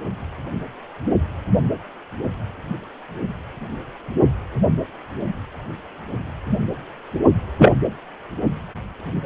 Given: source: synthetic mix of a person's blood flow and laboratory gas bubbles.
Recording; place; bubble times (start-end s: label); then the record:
Doppler ultrasound of blood flow; precordium
7.58-7.72 s: bubbles
From the record:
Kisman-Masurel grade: 113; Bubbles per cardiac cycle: 1 to 2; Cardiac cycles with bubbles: 1 to 10%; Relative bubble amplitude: loud (0.450 to 0.775); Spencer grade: 1 (occasional bubble signal discernible with the cardiac motion signal, with majority of cardiac periods free of bubbles); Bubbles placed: only in the low amplitude regions of the cardiac cycle